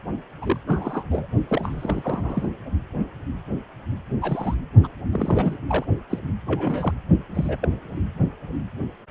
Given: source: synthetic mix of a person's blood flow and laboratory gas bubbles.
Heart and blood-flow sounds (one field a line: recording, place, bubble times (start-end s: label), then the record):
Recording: Doppler ultrasound of blood flow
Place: precordium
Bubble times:
0.42-0.57 s: bubbles
0.67-1.04 s: bubbles
1.10-1.27 s: bubbles
1.48-2.48 s: bubbles
4.21-4.54 s: bubbles
4.83-4.87 s: bubbles
5.12-5.57 s: bubbles
5.68-5.85 s: bubbles
6.10-6.19 s: bubbles
6.47-6.93 s: bubbles
7.35-7.58 s: bubbles
7.62-7.69 s: bubbles
From the record:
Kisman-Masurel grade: 232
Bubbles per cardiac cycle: several, 3 to 8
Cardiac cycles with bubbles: 50 to 99%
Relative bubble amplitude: moderate (0.250 to 0.450)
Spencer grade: 3 (all of the cardiac periods contain showers or single bubble signals, but not dominating or overriding the cardiac motion signals)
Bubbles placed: only in the low amplitude regions of the cardiac cycle